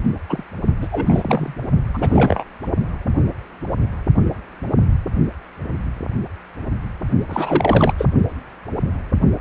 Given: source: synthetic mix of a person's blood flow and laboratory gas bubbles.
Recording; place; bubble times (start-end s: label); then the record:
Doppler ultrasound of blood flow; precordium
0.29-0.44 s: bubbles
0.81-0.88 s: bubbles
0.91-1.54 s: bubbles
1.94-2.44 s: bubbles
7.28-7.93 s: bubbles
7.98-8.06 s: bubbles
From the record:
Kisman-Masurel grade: 223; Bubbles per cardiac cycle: several, 3 to 8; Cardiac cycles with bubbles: 10 to 50%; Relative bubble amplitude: loud (0.450 to 0.775); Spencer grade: 2 (many but less than half of the cardiac periods contain bubble signals, singularly or in groups); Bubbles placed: only in the low amplitude regions of the cardiac cycle